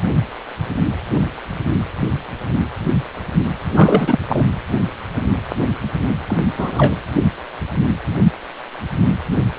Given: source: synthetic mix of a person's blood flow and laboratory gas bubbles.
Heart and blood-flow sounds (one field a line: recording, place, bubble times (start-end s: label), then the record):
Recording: Doppler ultrasound of blood flow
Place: precordium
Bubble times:
3.75-4.19 s: bubbles
4.28-4.44 s: bubbles
6.28-6.40 s: bubbles
6.58-6.95 s: bubbles
From the record:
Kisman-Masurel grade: 223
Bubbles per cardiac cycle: several, 3 to 8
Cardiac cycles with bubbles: 10 to 50%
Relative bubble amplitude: loud (0.450 to 0.775)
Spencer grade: 2 (many but less than half of the cardiac periods contain bubble signals, singularly or in groups)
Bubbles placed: anywhere in the cardiac cycle